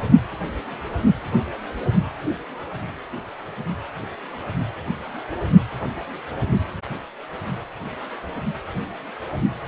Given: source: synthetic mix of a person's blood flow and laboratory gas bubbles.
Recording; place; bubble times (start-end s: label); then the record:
Doppler ultrasound of blood flow; precordium
no bubbles
From the record:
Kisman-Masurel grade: 000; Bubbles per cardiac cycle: 0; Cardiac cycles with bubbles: 0%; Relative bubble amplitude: no bubbles discernible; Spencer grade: 0 (complete lack of bubble signals)